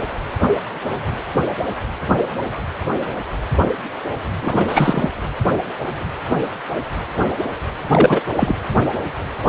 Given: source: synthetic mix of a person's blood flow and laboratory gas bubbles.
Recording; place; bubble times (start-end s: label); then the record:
Doppler ultrasound of blood flow; precordium
4.42-5.10 s: bubbles
7.92-8.21 s: bubbles
8.36-8.55 s: bubbles
From the record:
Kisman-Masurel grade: 223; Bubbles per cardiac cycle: several, 3 to 8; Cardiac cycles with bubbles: 10 to 50%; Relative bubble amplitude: loud (0.450 to 0.775); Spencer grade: 2 (many but less than half of the cardiac periods contain bubble signals, singularly or in groups); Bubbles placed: anywhere in the cardiac cycle